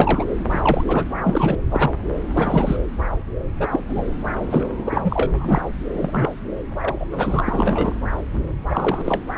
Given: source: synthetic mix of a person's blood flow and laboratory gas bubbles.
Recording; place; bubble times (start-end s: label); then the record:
Doppler ultrasound of blood flow; subclavian vein
0.00-0.24 s: bubbles
0.49-0.84 s: bubbles
0.88-1.03 s: bubbles
1.19-1.58 s: bubbles
1.71-1.91 s: bubbles
2.37-2.77 s: bubbles
3.60-3.68 s: bubbles
3.70-3.80 s: bubbles
3.89-4.03 s: bubbles
4.46-4.68 s: bubbles
4.78-5.32 s: bubbles
5.35-5.62 s: bubbles
5.93-6.32 s: bubbles
6.80-7.06 s: bubbles
7.12-7.44 s: bubbles
7.46-7.93 s: bubbles
8.70-9.20 s: bubbles
From the record:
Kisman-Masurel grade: 232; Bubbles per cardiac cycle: several, 3 to 8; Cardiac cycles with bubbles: 50 to 99%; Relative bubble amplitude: moderate (0.250 to 0.450); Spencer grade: 3 (all of the cardiac periods contain showers or single bubble signals, but not dominating or overriding the cardiac motion signals); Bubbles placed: anywhere in the cardiac cycle